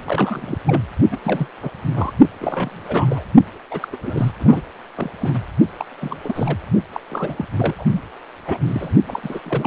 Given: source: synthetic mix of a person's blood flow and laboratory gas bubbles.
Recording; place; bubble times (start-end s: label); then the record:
Doppler ultrasound of blood flow; precordium
0.05-0.58 s: bubbles
0.67-0.81 s: bubbles
1.11-1.17 s: bubbles
1.23-1.47 s: bubbles
1.62-1.69 s: bubbles
1.94-2.12 s: bubbles
2.40-3.24 s: bubbles
3.71-3.88 s: bubbles
3.92-3.96 s: bubbles
4.03-4.32 s: bubbles
4.40-4.61 s: bubbles
4.96-5.11 s: bubbles
5.21-5.40 s: bubbles
5.78-5.86 s: bubbles
6.00-6.17 s: bubbles
6.24-6.58 s: bubbles
6.92-7.00 s: bubbles
7.10-7.46 s: bubbles
7.56-7.74 s: bubbles
7.78-7.84 s: bubbles
7.92-8.01 s: bubbles
8.45-8.94 s: bubbles
9.07-9.20 s: bubbles
9.22-9.41 s: bubbles
9.46-9.67 s: bubbles
From the record:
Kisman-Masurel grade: 342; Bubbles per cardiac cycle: rolling drumbeat, 9 or more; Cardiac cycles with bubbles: 100%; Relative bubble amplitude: moderate (0.250 to 0.450); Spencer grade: 3 (all of the cardiac periods contain showers or single bubble signals, but not dominating or overriding the cardiac motion signals); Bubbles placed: only in the low amplitude regions of the cardiac cycle